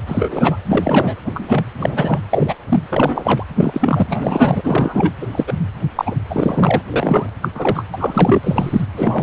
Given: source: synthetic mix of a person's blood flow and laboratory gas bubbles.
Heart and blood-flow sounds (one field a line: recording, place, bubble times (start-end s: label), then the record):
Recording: Doppler ultrasound of blood flow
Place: precordium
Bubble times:
0.07-0.57 s: bubbles
0.65-1.15 s: bubbles
1.25-1.64 s: bubbles
1.79-2.19 s: bubbles
2.31-2.54 s: bubbles
2.69-2.83 s: bubbles
2.90-3.44 s: bubbles
3.58-4.06 s: bubbles
4.09-5.12 s: bubbles
5.21-5.27 s: bubbles
5.31-5.44 s: bubbles
5.46-5.54 s: bubbles
5.95-6.15 s: bubbles
6.30-6.81 s: bubbles
6.90-7.29 s: bubbles
7.42-7.48 s: bubbles
7.54-7.85 s: bubbles
7.94-8.81 s: bubbles
8.96-9.23 s: bubbles
From the record:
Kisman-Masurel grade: 243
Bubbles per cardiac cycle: several, 3 to 8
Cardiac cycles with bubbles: 100%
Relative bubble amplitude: loud (0.450 to 0.775)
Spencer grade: 3 (all of the cardiac periods contain showers or single bubble signals, but not dominating or overriding the cardiac motion signals)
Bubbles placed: anywhere in the cardiac cycle